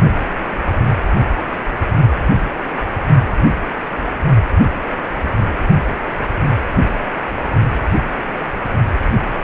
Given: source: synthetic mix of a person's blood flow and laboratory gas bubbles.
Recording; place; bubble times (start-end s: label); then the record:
Doppler ultrasound of blood flow; precordium
no bubbles
From the record:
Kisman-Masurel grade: 000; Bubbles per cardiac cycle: 0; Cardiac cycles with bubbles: 0%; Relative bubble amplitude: no bubbles discernible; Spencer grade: 0 (complete lack of bubble signals)